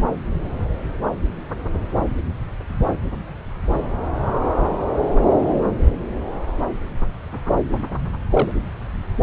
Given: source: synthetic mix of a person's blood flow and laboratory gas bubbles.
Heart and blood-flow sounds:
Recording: Doppler ultrasound of blood flow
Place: subclavian vein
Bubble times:
8.30-8.51 s: bubbles
From the record:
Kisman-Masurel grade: 112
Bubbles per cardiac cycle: 1 to 2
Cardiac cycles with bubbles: 1 to 10%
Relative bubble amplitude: moderate (0.250 to 0.450)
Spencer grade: 1 (occasional bubble signal discernible with the cardiac motion signal, with majority of cardiac periods free of bubbles)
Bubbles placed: anywhere in the cardiac cycle

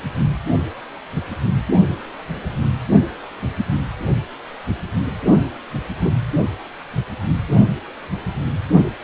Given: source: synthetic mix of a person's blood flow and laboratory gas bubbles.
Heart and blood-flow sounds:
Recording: Doppler ultrasound of blood flow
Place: precordium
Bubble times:
6.04-6.12 s: bubbles
From the record:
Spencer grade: 1 (occasional bubble signal discernible with the cardiac motion signal, with majority of cardiac periods free of bubbles)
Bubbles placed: only in the low amplitude regions of the cardiac cycle

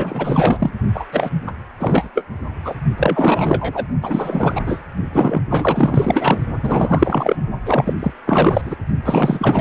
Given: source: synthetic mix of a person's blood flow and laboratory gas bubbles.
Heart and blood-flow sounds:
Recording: Doppler ultrasound of blood flow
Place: precordium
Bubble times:
0.00-0.73 s: bubbles
0.94-1.06 s: bubbles
1.11-1.30 s: bubbles
1.47-1.52 s: bubbles
1.80-2.10 s: bubbles
2.14-2.25 s: bubbles
2.64-2.75 s: bubbles
2.97-3.85 s: bubbles
4.02-4.83 s: bubbles
5.12-5.40 s: bubbles
5.49-6.38 s: bubbles
6.62-7.36 s: bubbles
7.65-7.93 s: bubbles
7.99-8.12 s: bubbles
8.26-8.62 s: bubbles
8.65-8.76 s: bubbles
9.03-9.61 s: bubbles
From the record:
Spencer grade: 4 (maximum detectable bubble signal sounding continuously throughout systole and diastole of every cardiac period, and overriding the amplitude of the normal cardiac signals)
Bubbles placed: only in the low amplitude regions of the cardiac cycle

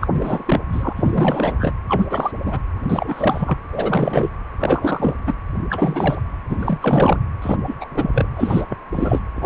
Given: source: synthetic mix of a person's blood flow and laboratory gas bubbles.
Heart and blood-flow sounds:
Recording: Doppler ultrasound of blood flow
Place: precordium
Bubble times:
0.00-0.08 s: bubbles
0.11-0.63 s: bubbles
0.72-0.93 s: bubbles
0.96-1.73 s: bubbles
1.88-2.31 s: bubbles
2.46-2.60 s: bubbles
2.82-3.57 s: bubbles
3.71-4.29 s: bubbles
4.58-5.15 s: bubbles
5.26-5.34 s: bubbles
5.70-6.23 s: bubbles
6.49-6.57 s: bubbles
6.59-7.19 s: bubbles
7.42-7.59 s: bubbles
7.67-7.75 s: bubbles
7.80-7.88 s: bubbles
7.94-8.28 s: bubbles
8.36-8.65 s: bubbles
8.69-8.78 s: bubbles
8.92-9.20 s: bubbles
9.35-9.46 s: bubbles
From the record:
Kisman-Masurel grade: 343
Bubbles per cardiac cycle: rolling drumbeat, 9 or more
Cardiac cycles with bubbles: 100%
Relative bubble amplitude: loud (0.450 to 0.775)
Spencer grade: 3 (all of the cardiac periods contain showers or single bubble signals, but not dominating or overriding the cardiac motion signals)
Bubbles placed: anywhere in the cardiac cycle

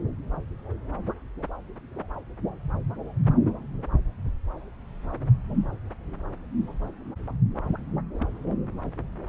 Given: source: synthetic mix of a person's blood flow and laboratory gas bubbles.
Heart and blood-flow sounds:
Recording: Doppler ultrasound of blood flow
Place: subclavian vein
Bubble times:
8.18-8.28 s: bubbles
From the record:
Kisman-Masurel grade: 111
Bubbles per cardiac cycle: 1 to 2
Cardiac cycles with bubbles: 1 to 10%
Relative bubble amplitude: barely perceptible (0.100 to 0.250)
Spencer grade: 1 (occasional bubble signal discernible with the cardiac motion signal, with majority of cardiac periods free of bubbles)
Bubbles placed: anywhere in the cardiac cycle

